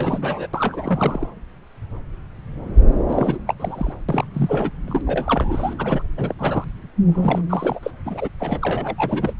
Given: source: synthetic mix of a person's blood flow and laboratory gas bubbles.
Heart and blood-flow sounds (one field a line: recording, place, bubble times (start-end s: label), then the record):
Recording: Doppler ultrasound of blood flow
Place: subclavian vein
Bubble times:
0.00-0.47 s: bubbles
0.53-1.29 s: bubbles
3.08-3.37 s: bubbles
3.47-3.54 s: bubbles
3.60-3.93 s: bubbles
4.08-4.25 s: bubbles
4.33-4.70 s: bubbles
4.88-5.01 s: bubbles
5.07-5.75 s: bubbles
5.79-6.02 s: bubbles
6.17-6.34 s: bubbles
6.38-6.65 s: bubbles
7.05-7.42 s: bubbles
7.50-7.79 s: bubbles
7.83-7.91 s: bubbles
8.05-8.29 s: bubbles
8.40-8.60 s: bubbles
8.62-8.95 s: bubbles
8.97-9.33 s: bubbles
From the record:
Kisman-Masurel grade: 332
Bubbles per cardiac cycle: rolling drumbeat, 9 or more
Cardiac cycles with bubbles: 50 to 99%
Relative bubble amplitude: moderate (0.250 to 0.450)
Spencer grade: 3 (all of the cardiac periods contain showers or single bubble signals, but not dominating or overriding the cardiac motion signals)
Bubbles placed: anywhere in the cardiac cycle